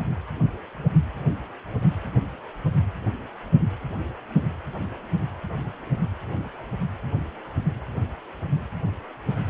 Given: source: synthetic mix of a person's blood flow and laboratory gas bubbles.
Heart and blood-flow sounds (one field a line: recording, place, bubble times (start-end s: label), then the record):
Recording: Doppler ultrasound of blood flow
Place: precordium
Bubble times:
no bubbles
From the record:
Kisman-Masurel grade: 000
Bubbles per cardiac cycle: 0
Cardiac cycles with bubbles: 0%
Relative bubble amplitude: no bubbles discernible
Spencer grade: 0 (complete lack of bubble signals)